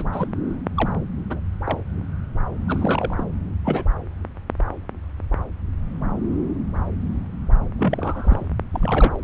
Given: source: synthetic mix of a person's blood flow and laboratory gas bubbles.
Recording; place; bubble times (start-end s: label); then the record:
Doppler ultrasound of blood flow; subclavian vein
0.00-0.09 s: bubbles
0.11-0.27 s: bubbles
0.74-0.93 s: bubbles
1.28-1.40 s: bubbles
1.64-1.81 s: bubbles
2.68-3.24 s: bubbles
3.65-3.84 s: bubbles
7.77-8.47 s: bubbles
8.71-9.19 s: bubbles
From the record:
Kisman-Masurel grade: 222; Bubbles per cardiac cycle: several, 3 to 8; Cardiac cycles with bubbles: 10 to 50%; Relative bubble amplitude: moderate (0.250 to 0.450); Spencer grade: 2 (many but less than half of the cardiac periods contain bubble signals, singularly or in groups); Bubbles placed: anywhere in the cardiac cycle